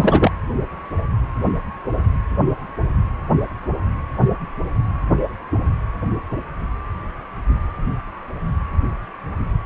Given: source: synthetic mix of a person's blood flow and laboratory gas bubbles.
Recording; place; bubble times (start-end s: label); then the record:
Doppler ultrasound of blood flow; precordium
0.00-0.32 s: bubbles
From the record:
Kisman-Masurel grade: 213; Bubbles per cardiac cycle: several, 3 to 8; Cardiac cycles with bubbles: 1 to 10%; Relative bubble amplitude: loud (0.450 to 0.775); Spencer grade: 1 (occasional bubble signal discernible with the cardiac motion signal, with majority of cardiac periods free of bubbles); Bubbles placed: anywhere in the cardiac cycle